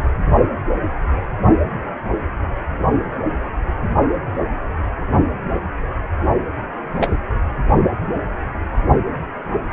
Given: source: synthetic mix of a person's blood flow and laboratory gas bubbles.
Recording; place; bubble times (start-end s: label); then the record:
Doppler ultrasound of blood flow; precordium
7.00-7.21 s: bubbles
From the record:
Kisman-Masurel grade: 112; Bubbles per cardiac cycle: 1 to 2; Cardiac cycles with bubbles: 1 to 10%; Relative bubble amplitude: moderate (0.250 to 0.450); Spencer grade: 1 (occasional bubble signal discernible with the cardiac motion signal, with majority of cardiac periods free of bubbles); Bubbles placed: only in the low amplitude regions of the cardiac cycle